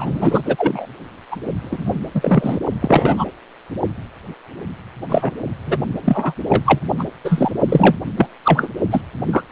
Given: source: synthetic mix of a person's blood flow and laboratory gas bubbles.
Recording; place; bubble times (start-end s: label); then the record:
Doppler ultrasound of blood flow; precordium
0.00-0.41 s: bubbles
0.45-0.86 s: bubbles
1.31-1.36 s: bubbles
1.62-1.95 s: bubbles
2.14-2.58 s: bubbles
2.81-3.25 s: bubbles
5.09-5.33 s: bubbles
5.66-5.76 s: bubbles
5.92-6.33 s: bubbles
6.49-6.63 s: bubbles
6.66-6.79 s: bubbles
6.99-7.04 s: bubbles
7.24-7.51 s: bubbles
7.69-7.96 s: bubbles
8.17-8.27 s: bubbles
8.44-8.68 s: bubbles
8.91-9.01 s: bubbles
9.27-9.42 s: bubbles
From the record:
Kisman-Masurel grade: 243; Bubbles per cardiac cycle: several, 3 to 8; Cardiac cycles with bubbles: 100%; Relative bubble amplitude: loud (0.450 to 0.775); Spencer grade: 3 (all of the cardiac periods contain showers or single bubble signals, but not dominating or overriding the cardiac motion signals); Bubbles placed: only in the low amplitude regions of the cardiac cycle